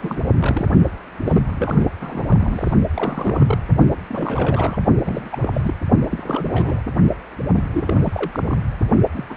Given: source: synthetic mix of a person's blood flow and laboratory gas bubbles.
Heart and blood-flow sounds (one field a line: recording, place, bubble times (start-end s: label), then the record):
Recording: Doppler ultrasound of blood flow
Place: precordium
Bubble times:
0.00-0.21 s: bubbles
0.39-0.66 s: bubbles
1.24-1.42 s: bubbles
1.46-1.86 s: bubbles
2.00-2.73 s: bubbles
2.94-3.58 s: bubbles
4.09-4.79 s: bubbles
5.04-5.74 s: bubbles
6.10-6.82 s: bubbles
7.55-7.70 s: bubbles
7.73-8.67 s: bubbles
9.16-9.25 s: bubbles
9.30-9.36 s: bubbles
From the record:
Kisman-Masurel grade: 342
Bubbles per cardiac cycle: rolling drumbeat, 9 or more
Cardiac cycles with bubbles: 100%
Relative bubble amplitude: moderate (0.250 to 0.450)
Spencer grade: 3 (all of the cardiac periods contain showers or single bubble signals, but not dominating or overriding the cardiac motion signals)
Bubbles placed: only in the low amplitude regions of the cardiac cycle